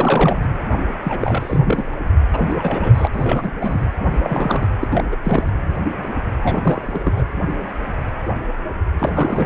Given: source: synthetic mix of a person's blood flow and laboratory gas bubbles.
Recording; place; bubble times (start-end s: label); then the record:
Doppler ultrasound of blood flow; precordium
0.00-0.48 s: bubbles
1.03-1.96 s: bubbles
2.33-2.54 s: bubbles
2.58-3.08 s: bubbles
3.12-3.52 s: bubbles
3.60-3.85 s: bubbles
4.23-4.69 s: bubbles
4.81-4.88 s: bubbles
4.91-5.04 s: bubbles
5.12-5.16 s: bubbles
5.24-5.51 s: bubbles
6.43-7.24 s: bubbles
8.99-9.46 s: bubbles
From the record:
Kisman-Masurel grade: 332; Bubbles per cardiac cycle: rolling drumbeat, 9 or more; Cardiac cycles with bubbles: 50 to 99%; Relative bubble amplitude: moderate (0.250 to 0.450); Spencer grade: 3 (all of the cardiac periods contain showers or single bubble signals, but not dominating or overriding the cardiac motion signals); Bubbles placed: anywhere in the cardiac cycle